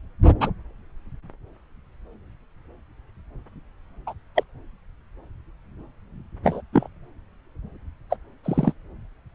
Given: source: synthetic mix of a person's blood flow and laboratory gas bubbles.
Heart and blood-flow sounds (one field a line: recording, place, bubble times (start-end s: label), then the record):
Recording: Doppler ultrasound of blood flow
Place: subclavian vein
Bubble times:
0.40-0.51 s: bubbles
4.06-4.13 s: bubbles
4.35-4.43 s: bubbles
6.43-6.61 s: bubbles
6.72-6.88 s: bubbles
8.10-8.17 s: bubbles
8.44-8.72 s: bubbles
From the record:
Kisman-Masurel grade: 123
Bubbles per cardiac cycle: 1 to 2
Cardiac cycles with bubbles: 10 to 50%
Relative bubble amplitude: loud (0.450 to 0.775)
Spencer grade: 2 (many but less than half of the cardiac periods contain bubble signals, singularly or in groups)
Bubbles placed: anywhere in the cardiac cycle